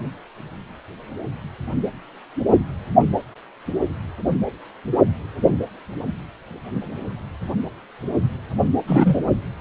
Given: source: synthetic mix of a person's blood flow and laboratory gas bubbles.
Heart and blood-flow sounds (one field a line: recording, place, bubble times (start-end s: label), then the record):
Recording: Doppler ultrasound of blood flow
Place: precordium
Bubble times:
8.87-9.21 s: bubbles
From the record:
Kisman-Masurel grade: 113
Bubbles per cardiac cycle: 1 to 2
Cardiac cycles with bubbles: 1 to 10%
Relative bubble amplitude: loud (0.450 to 0.775)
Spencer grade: 1 (occasional bubble signal discernible with the cardiac motion signal, with majority of cardiac periods free of bubbles)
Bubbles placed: anywhere in the cardiac cycle